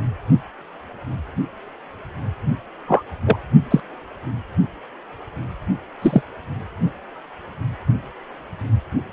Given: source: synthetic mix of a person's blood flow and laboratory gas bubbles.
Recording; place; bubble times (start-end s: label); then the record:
Doppler ultrasound of blood flow; precordium
2.87-3.02 s: bubbles
3.25-3.36 s: bubbles
3.70-3.80 s: bubbles
6.01-6.21 s: bubbles
From the record:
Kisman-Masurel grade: 123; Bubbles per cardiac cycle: 1 to 2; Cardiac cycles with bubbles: 10 to 50%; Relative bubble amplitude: loud (0.450 to 0.775); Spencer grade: 2 (many but less than half of the cardiac periods contain bubble signals, singularly or in groups); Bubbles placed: only in the low amplitude regions of the cardiac cycle